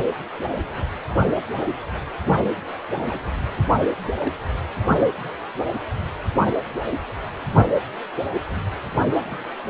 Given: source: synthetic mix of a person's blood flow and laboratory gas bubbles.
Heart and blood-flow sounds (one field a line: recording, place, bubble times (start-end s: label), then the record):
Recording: Doppler ultrasound of blood flow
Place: precordium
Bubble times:
0.51-0.58 s: bubbles
0.62-0.65 s: bubbles
2.95-3.00 s: bubbles
3.08-3.27 s: bubbles
4.17-4.34 s: bubbles
9.27-9.37 s: bubbles
From the record:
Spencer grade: 2 (many but less than half of the cardiac periods contain bubble signals, singularly or in groups)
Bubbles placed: only in the low amplitude regions of the cardiac cycle